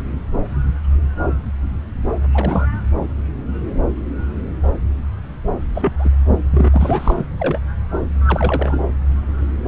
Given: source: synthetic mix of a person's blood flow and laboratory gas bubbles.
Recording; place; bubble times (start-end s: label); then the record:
Doppler ultrasound of blood flow; subclavian vein
2.33-2.67 s: bubbles
5.74-5.93 s: bubbles
5.99-6.09 s: bubbles
6.51-6.70 s: bubbles
6.73-7.25 s: bubbles
7.36-7.60 s: bubbles
8.25-8.78 s: bubbles
From the record:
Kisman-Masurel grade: 222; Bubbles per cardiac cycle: several, 3 to 8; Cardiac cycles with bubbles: 10 to 50%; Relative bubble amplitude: moderate (0.250 to 0.450); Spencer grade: 2 (many but less than half of the cardiac periods contain bubble signals, singularly or in groups); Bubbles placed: anywhere in the cardiac cycle